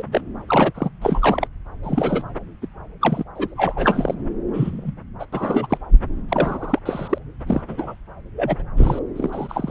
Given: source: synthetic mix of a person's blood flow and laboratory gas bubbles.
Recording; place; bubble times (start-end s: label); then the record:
Doppler ultrasound of blood flow; subclavian vein
0.00-0.02 s: bubbles
0.12-0.21 s: bubbles
0.48-0.71 s: bubbles
0.74-0.90 s: bubbles
1.01-1.47 s: bubbles
1.83-2.23 s: bubbles
2.62-2.68 s: bubbles
3.01-3.24 s: bubbles
3.35-3.54 s: bubbles
3.57-4.15 s: bubbles
4.53-4.93 s: bubbles
5.19-5.25 s: bubbles
5.33-5.67 s: bubbles
5.70-5.78 s: bubbles
6.29-6.79 s: bubbles
6.85-7.19 s: bubbles
7.46-7.62 s: bubbles
7.68-7.95 s: bubbles
8.35-8.56 s: bubbles
8.59-8.62 s: bubbles
8.76-8.99 s: bubbles
9.15-9.71 s: bubbles
From the record:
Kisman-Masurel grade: 242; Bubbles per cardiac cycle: several, 3 to 8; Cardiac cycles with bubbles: 100%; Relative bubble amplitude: moderate (0.250 to 0.450); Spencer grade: 3 (all of the cardiac periods contain showers or single bubble signals, but not dominating or overriding the cardiac motion signals); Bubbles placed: anywhere in the cardiac cycle